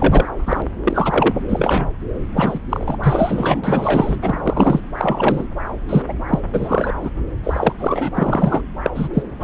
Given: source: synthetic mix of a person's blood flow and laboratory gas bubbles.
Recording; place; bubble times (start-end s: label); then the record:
Doppler ultrasound of blood flow; subclavian vein
0.00-0.28 s: bubbles
0.46-0.62 s: bubbles
0.83-1.34 s: bubbles
1.47-1.89 s: bubbles
2.36-2.59 s: bubbles
2.70-2.96 s: bubbles
3.03-4.16 s: bubbles
4.21-4.80 s: bubbles
4.97-5.47 s: bubbles
5.88-6.02 s: bubbles
6.07-6.13 s: bubbles
6.27-6.40 s: bubbles
6.53-6.93 s: bubbles
7.01-7.10 s: bubbles
7.43-7.72 s: bubbles
7.79-8.09 s: bubbles
8.14-8.62 s: bubbles
8.83-8.90 s: bubbles
8.95-9.09 s: bubbles
9.13-9.22 s: bubbles
9.39-9.44 s: bubbles
From the record:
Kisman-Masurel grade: 243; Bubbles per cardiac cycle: several, 3 to 8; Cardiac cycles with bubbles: 100%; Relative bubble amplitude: loud (0.450 to 0.775); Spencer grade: 3 (all of the cardiac periods contain showers or single bubble signals, but not dominating or overriding the cardiac motion signals); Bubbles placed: anywhere in the cardiac cycle